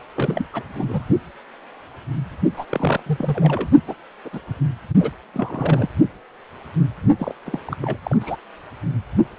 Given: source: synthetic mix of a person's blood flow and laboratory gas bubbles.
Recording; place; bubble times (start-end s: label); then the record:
Doppler ultrasound of blood flow; precordium
0.14-0.48 s: bubbles
0.53-0.64 s: bubbles
0.75-1.04 s: bubbles
2.56-2.65 s: bubbles
2.69-3.03 s: bubbles
3.06-3.69 s: bubbles
3.87-3.95 s: bubbles
4.25-4.29 s: bubbles
4.33-4.40 s: bubbles
5.00-5.11 s: bubbles
5.33-5.88 s: bubbles
7.19-7.34 s: bubbles
7.45-7.59 s: bubbles
7.65-7.77 s: bubbles
7.82-7.97 s: bubbles
8.03-8.17 s: bubbles
8.20-8.36 s: bubbles
From the record:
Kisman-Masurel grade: 232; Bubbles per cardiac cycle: several, 3 to 8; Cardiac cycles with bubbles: 50 to 99%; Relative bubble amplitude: moderate (0.250 to 0.450); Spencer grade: 3 (all of the cardiac periods contain showers or single bubble signals, but not dominating or overriding the cardiac motion signals); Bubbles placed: only in the low amplitude regions of the cardiac cycle